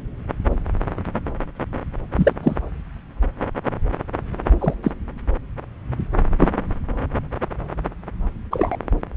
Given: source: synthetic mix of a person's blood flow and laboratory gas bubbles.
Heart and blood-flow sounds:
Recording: Doppler ultrasound of blood flow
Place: subclavian vein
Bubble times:
2.15-2.32 s: bubbles
2.42-2.56 s: bubbles
4.60-4.74 s: bubbles
4.83-4.91 s: bubbles
6.39-6.48 s: bubbles
8.51-8.77 s: bubbles
From the record:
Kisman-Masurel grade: 123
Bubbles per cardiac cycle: 1 to 2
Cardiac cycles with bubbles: 10 to 50%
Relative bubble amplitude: loud (0.450 to 0.775)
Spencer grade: 2 (many but less than half of the cardiac periods contain bubble signals, singularly or in groups)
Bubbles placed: anywhere in the cardiac cycle

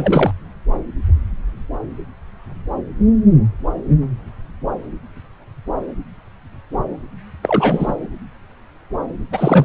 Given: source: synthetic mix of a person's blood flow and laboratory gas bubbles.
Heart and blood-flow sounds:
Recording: Doppler ultrasound of blood flow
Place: subclavian vein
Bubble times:
0.00-0.32 s: bubbles
7.42-7.96 s: bubbles
9.31-9.65 s: bubbles
From the record:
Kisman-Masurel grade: 223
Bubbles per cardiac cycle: several, 3 to 8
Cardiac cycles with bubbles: 10 to 50%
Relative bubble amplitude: loud (0.450 to 0.775)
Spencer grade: 2 (many but less than half of the cardiac periods contain bubble signals, singularly or in groups)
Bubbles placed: anywhere in the cardiac cycle

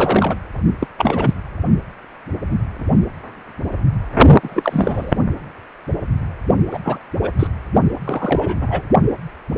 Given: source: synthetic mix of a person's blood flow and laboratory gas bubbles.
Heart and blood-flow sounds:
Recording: Doppler ultrasound of blood flow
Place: precordium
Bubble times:
0.00-0.37 s: bubbles
0.80-0.88 s: bubbles
0.98-1.33 s: bubbles
4.42-5.13 s: bubbles
6.71-6.79 s: bubbles
6.83-6.99 s: bubbles
7.22-7.33 s: bubbles
7.39-7.47 s: bubbles
8.04-8.55 s: bubbles
8.61-8.82 s: bubbles
From the record:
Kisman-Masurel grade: 233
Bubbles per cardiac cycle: several, 3 to 8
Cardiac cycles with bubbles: 50 to 99%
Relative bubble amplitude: loud (0.450 to 0.775)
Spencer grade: 3 (all of the cardiac periods contain showers or single bubble signals, but not dominating or overriding the cardiac motion signals)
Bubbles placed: only in the low amplitude regions of the cardiac cycle

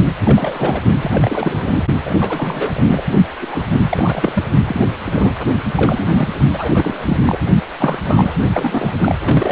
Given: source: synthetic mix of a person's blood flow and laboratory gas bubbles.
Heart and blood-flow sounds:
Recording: Doppler ultrasound of blood flow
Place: precordium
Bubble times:
0.22-0.81 s: bubbles
1.02-1.86 s: bubbles
2.05-2.15 s: bubbles
2.21-3.03 s: bubbles
3.41-3.71 s: bubbles
3.91-4.44 s: bubbles
4.65-4.87 s: bubbles
4.98-5.32 s: bubbles
5.75-6.29 s: bubbles
6.53-7.38 s: bubbles
7.79-7.98 s: bubbles
8.01-8.33 s: bubbles
8.53-8.93 s: bubbles
9.00-9.52 s: bubbles
From the record:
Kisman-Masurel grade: 342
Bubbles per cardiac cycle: rolling drumbeat, 9 or more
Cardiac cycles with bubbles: 100%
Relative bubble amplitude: moderate (0.250 to 0.450)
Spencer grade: 3 (all of the cardiac periods contain showers or single bubble signals, but not dominating or overriding the cardiac motion signals)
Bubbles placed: only in the low amplitude regions of the cardiac cycle

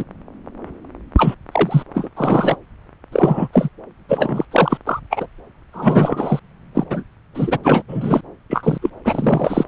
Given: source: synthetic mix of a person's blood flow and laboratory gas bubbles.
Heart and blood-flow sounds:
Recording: Doppler ultrasound of blood flow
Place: subclavian vein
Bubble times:
0.00-0.04 s: bubbles
1.17-1.34 s: bubbles
1.52-1.82 s: bubbles
1.94-2.09 s: bubbles
2.17-2.56 s: bubbles
3.12-3.48 s: bubbles
3.52-3.68 s: bubbles
4.08-4.45 s: bubbles
4.51-4.77 s: bubbles
4.87-5.00 s: bubbles
5.10-5.27 s: bubbles
5.73-6.39 s: bubbles
6.74-6.84 s: bubbles
6.90-7.03 s: bubbles
7.34-7.58 s: bubbles
7.63-7.82 s: bubbles
7.87-8.21 s: bubbles
8.50-8.78 s: bubbles
8.82-8.90 s: bubbles
9.04-9.65 s: bubbles
From the record:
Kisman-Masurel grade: 233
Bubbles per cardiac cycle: several, 3 to 8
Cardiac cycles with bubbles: 50 to 99%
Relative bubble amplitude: loud (0.450 to 0.775)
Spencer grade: 3 (all of the cardiac periods contain showers or single bubble signals, but not dominating or overriding the cardiac motion signals)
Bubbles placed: anywhere in the cardiac cycle

